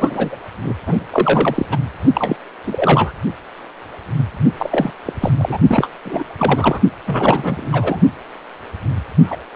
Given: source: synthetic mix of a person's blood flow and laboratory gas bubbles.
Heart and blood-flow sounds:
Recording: Doppler ultrasound of blood flow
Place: precordium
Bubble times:
0.00-0.36 s: bubbles
0.63-0.74 s: bubbles
0.86-1.04 s: bubbles
1.10-1.66 s: bubbles
1.71-1.78 s: bubbles
2.13-2.36 s: bubbles
2.67-3.12 s: bubbles
4.57-4.90 s: bubbles
5.05-5.13 s: bubbles
5.20-5.31 s: bubbles
5.38-5.58 s: bubbles
5.67-5.90 s: bubbles
6.04-6.24 s: bubbles
6.38-6.81 s: bubbles
7.06-7.69 s: bubbles
7.71-8.00 s: bubbles
9.27-9.36 s: bubbles
From the record:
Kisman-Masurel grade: 333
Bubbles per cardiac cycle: rolling drumbeat, 9 or more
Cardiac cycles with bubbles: 50 to 99%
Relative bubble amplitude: loud (0.450 to 0.775)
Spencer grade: 3 (all of the cardiac periods contain showers or single bubble signals, but not dominating or overriding the cardiac motion signals)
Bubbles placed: only in the low amplitude regions of the cardiac cycle

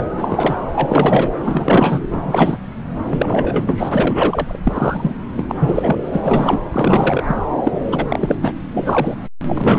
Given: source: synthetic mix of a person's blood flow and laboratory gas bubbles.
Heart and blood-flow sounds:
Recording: Doppler ultrasound of blood flow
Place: subclavian vein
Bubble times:
0.00-0.06 s: bubbles
0.15-0.57 s: bubbles
0.73-1.29 s: bubbles
1.39-1.99 s: bubbles
2.09-2.58 s: bubbles
3.06-4.60 s: bubbles
4.63-5.13 s: bubbles
5.36-5.44 s: bubbles
5.48-5.55 s: bubbles
5.58-5.97 s: bubbles
6.12-6.59 s: bubbles
6.72-7.23 s: bubbles
7.27-7.36 s: bubbles
7.64-7.72 s: bubbles
7.86-8.05 s: bubbles
8.09-8.36 s: bubbles
8.41-8.53 s: bubbles
8.71-9.15 s: bubbles
9.47-9.78 s: bubbles
From the record:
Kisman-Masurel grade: 343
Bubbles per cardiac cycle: rolling drumbeat, 9 or more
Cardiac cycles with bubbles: 100%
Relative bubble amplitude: loud (0.450 to 0.775)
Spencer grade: 3 (all of the cardiac periods contain showers or single bubble signals, but not dominating or overriding the cardiac motion signals)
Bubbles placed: anywhere in the cardiac cycle

